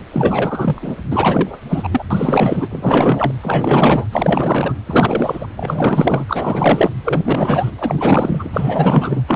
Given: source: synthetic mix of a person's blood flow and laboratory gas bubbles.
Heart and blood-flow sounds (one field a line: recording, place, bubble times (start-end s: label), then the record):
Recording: Doppler ultrasound of blood flow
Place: precordium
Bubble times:
0.12-0.96 s: bubbles
1.10-1.59 s: bubbles
1.69-1.89 s: bubbles
1.91-2.04 s: bubbles
2.10-2.68 s: bubbles
2.71-3.33 s: bubbles
3.42-4.08 s: bubbles
4.12-4.74 s: bubbles
4.86-5.48 s: bubbles
5.57-6.24 s: bubbles
6.28-6.90 s: bubbles
7.04-7.71 s: bubbles
7.78-8.50 s: bubbles
8.52-9.22 s: bubbles
9.27-9.36 s: bubbles
From the record:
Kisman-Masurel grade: 444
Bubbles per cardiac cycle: continuous sound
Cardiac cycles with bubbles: 100%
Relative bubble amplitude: maximal (0.775 to 0.999)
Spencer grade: 4 (maximum detectable bubble signal sounding continuously throughout systole and diastole of every cardiac period, and overriding the amplitude of the normal cardiac signals)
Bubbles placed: anywhere in the cardiac cycle